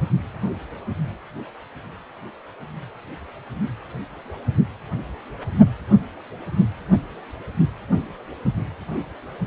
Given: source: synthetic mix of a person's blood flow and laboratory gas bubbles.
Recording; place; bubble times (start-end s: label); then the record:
Doppler ultrasound of blood flow; precordium
no bubbles
From the record:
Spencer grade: 0 (complete lack of bubble signals)